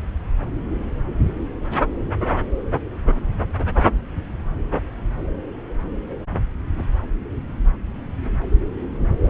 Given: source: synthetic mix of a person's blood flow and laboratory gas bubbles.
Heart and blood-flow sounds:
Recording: Doppler ultrasound of blood flow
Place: subclavian vein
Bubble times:
9.24-9.30 s: bubbles
From the record:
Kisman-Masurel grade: 212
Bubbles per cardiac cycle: several, 3 to 8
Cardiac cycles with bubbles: 1 to 10%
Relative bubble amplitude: moderate (0.250 to 0.450)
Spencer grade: 1 (occasional bubble signal discernible with the cardiac motion signal, with majority of cardiac periods free of bubbles)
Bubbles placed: anywhere in the cardiac cycle

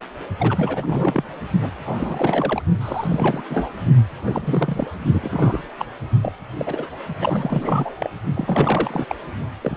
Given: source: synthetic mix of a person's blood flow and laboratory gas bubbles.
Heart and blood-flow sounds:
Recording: Doppler ultrasound of blood flow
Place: precordium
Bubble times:
0.39-1.24 s: bubbles
1.60-1.70 s: bubbles
1.85-2.62 s: bubbles
2.81-3.42 s: bubbles
3.50-3.69 s: bubbles
4.25-4.88 s: bubbles
5.13-5.60 s: bubbles
5.79-5.86 s: bubbles
6.21-6.33 s: bubbles
6.58-6.88 s: bubbles
7.17-7.96 s: bubbles
8.00-8.10 s: bubbles
8.35-9.05 s: bubbles
9.09-9.15 s: bubbles
9.61-9.76 s: bubbles
From the record:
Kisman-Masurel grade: 342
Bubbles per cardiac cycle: rolling drumbeat, 9 or more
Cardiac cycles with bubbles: 100%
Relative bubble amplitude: moderate (0.250 to 0.450)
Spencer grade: 3 (all of the cardiac periods contain showers or single bubble signals, but not dominating or overriding the cardiac motion signals)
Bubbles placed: only in the low amplitude regions of the cardiac cycle

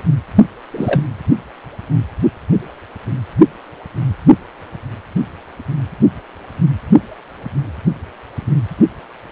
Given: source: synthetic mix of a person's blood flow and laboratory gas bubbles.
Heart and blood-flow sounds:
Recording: Doppler ultrasound of blood flow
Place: precordium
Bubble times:
0.70-1.07 s: bubbles
From the record:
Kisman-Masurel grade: 212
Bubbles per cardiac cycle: several, 3 to 8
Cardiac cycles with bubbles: 1 to 10%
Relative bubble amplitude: moderate (0.250 to 0.450)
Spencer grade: 1 (occasional bubble signal discernible with the cardiac motion signal, with majority of cardiac periods free of bubbles)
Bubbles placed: anywhere in the cardiac cycle

